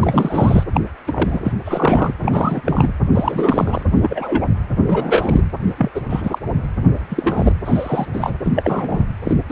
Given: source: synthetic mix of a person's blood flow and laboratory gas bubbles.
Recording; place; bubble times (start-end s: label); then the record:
Doppler ultrasound of blood flow; precordium
0.01-0.63 s: bubbles
0.73-0.81 s: bubbles
1.06-1.40 s: bubbles
1.44-1.52 s: bubbles
1.65-2.12 s: bubbles
2.21-2.61 s: bubbles
2.65-2.94 s: bubbles
3.14-3.83 s: bubbles
3.95-4.49 s: bubbles
4.88-5.43 s: bubbles
5.77-5.92 s: bubbles
5.95-6.01 s: bubbles
6.09-6.38 s: bubbles
6.99-7.00 s: bubbles
7.09-7.54 s: bubbles
7.65-8.06 s: bubbles
8.13-8.35 s: bubbles
8.44-9.06 s: bubbles
9.24-9.37 s: bubbles
9.49-9.52 s: bubbles
From the record:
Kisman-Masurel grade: 243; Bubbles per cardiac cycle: several, 3 to 8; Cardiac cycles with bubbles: 100%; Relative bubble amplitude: loud (0.450 to 0.775); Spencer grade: 3 (all of the cardiac periods contain showers or single bubble signals, but not dominating or overriding the cardiac motion signals); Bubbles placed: anywhere in the cardiac cycle